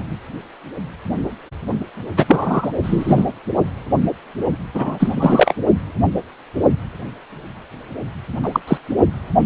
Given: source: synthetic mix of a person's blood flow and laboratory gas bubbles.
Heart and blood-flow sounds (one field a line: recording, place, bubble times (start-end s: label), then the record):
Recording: Doppler ultrasound of blood flow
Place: precordium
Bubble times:
2.17-2.25 s: bubbles
2.28-2.71 s: bubbles
2.82-3.25 s: bubbles
4.74-5.54 s: bubbles
8.43-8.60 s: bubbles
8.67-8.78 s: bubbles
From the record:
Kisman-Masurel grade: 223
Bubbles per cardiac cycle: several, 3 to 8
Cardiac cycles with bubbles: 10 to 50%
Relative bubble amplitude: loud (0.450 to 0.775)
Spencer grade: 2 (many but less than half of the cardiac periods contain bubble signals, singularly or in groups)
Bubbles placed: only in the low amplitude regions of the cardiac cycle